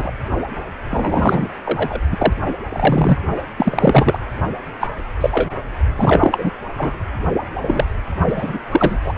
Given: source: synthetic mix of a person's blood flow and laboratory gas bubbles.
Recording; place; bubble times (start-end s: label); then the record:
Doppler ultrasound of blood flow; precordium
0.00-0.12 s: bubbles
0.90-1.49 s: bubbles
1.66-2.00 s: bubbles
2.11-2.32 s: bubbles
2.69-3.18 s: bubbles
3.56-4.19 s: bubbles
4.80-4.88 s: bubbles
5.21-5.55 s: bubbles
5.98-6.50 s: bubbles
6.77-6.94 s: bubbles
7.62-7.85 s: bubbles
8.28-8.58 s: bubbles
8.71-8.98 s: bubbles
9.04-9.13 s: bubbles
From the record:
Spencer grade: 3 (all of the cardiac periods contain showers or single bubble signals, but not dominating or overriding the cardiac motion signals); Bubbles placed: only in the low amplitude regions of the cardiac cycle